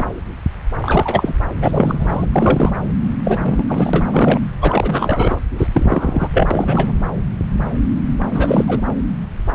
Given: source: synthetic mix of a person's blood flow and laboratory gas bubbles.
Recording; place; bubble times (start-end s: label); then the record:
Doppler ultrasound of blood flow; subclavian vein
0.00-0.07 s: bubbles
0.82-1.34 s: bubbles
1.60-2.25 s: bubbles
2.32-2.72 s: bubbles
3.24-4.40 s: bubbles
4.61-5.39 s: bubbles
5.57-5.68 s: bubbles
5.72-6.29 s: bubbles
6.33-6.47 s: bubbles
6.50-6.92 s: bubbles
8.32-8.81 s: bubbles
From the record:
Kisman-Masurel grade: 333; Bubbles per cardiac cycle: rolling drumbeat, 9 or more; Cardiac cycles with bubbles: 50 to 99%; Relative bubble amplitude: loud (0.450 to 0.775); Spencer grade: 3 (all of the cardiac periods contain showers or single bubble signals, but not dominating or overriding the cardiac motion signals); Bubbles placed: anywhere in the cardiac cycle